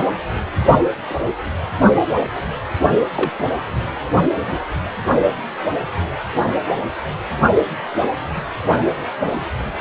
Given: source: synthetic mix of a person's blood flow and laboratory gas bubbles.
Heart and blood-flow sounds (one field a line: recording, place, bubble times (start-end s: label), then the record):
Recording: Doppler ultrasound of blood flow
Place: precordium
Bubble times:
3.16-3.31 s: bubbles
From the record:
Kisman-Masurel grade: 122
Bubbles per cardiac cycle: 1 to 2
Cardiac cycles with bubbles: 10 to 50%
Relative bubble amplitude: moderate (0.250 to 0.450)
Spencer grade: 2 (many but less than half of the cardiac periods contain bubble signals, singularly or in groups)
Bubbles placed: only in the low amplitude regions of the cardiac cycle